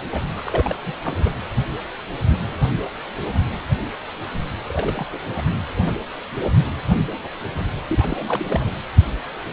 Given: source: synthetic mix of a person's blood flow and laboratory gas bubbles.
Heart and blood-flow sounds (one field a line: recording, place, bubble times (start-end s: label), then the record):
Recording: Doppler ultrasound of blood flow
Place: precordium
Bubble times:
0.00-0.03 s: bubbles
0.11-0.22 s: bubbles
0.36-0.76 s: bubbles
0.82-0.93 s: bubbles
1.04-1.30 s: bubbles
4.67-5.06 s: bubbles
5.13-5.19 s: bubbles
5.38-5.42 s: bubbles
7.89-8.71 s: bubbles
From the record:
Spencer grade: 2 (many but less than half of the cardiac periods contain bubble signals, singularly or in groups)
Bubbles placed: anywhere in the cardiac cycle